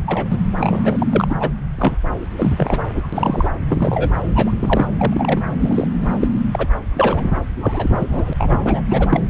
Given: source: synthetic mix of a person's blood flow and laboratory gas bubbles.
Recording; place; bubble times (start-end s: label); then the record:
Doppler ultrasound of blood flow; subclavian vein
0.06-0.28 s: bubbles
0.30-0.38 s: bubbles
0.58-1.35 s: bubbles
1.40-1.49 s: bubbles
1.79-1.97 s: bubbles
2.37-3.08 s: bubbles
3.12-3.52 s: bubbles
3.68-4.12 s: bubbles
4.34-4.51 s: bubbles
4.59-4.87 s: bubbles
4.98-5.41 s: bubbles
5.59-5.88 s: bubbles
5.99-6.07 s: bubbles
6.21-6.28 s: bubbles
6.53-6.67 s: bubbles
6.95-7.31 s: bubbles
7.61-7.90 s: bubbles
7.99-8.33 s: bubbles
8.38-8.82 s: bubbles
8.88-9.22 s: bubbles
From the record:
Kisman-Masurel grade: 242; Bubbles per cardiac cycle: several, 3 to 8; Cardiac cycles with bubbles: 100%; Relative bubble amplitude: moderate (0.250 to 0.450); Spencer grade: 3 (all of the cardiac periods contain showers or single bubble signals, but not dominating or overriding the cardiac motion signals); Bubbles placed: anywhere in the cardiac cycle